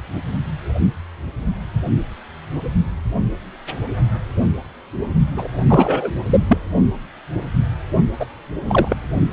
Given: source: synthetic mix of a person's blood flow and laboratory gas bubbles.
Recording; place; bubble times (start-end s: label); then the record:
Doppler ultrasound of blood flow; precordium
5.36-5.48 s: bubbles
5.67-6.12 s: bubbles
6.26-6.41 s: bubbles
6.49-6.58 s: bubbles
8.20-8.26 s: bubbles
8.65-8.96 s: bubbles
From the record:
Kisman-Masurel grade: 223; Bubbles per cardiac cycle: several, 3 to 8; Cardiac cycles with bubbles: 10 to 50%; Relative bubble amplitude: loud (0.450 to 0.775); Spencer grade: 2 (many but less than half of the cardiac periods contain bubble signals, singularly or in groups); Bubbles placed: only in the low amplitude regions of the cardiac cycle